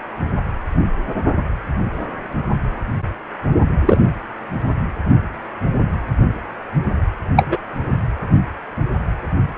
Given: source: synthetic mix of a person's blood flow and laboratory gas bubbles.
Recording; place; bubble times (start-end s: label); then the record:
Doppler ultrasound of blood flow; precordium
3.85-3.97 s: bubbles
7.36-7.57 s: bubbles
From the record:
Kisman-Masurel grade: 123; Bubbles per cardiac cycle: 1 to 2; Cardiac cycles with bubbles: 10 to 50%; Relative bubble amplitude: loud (0.450 to 0.775); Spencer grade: 2 (many but less than half of the cardiac periods contain bubble signals, singularly or in groups); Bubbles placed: anywhere in the cardiac cycle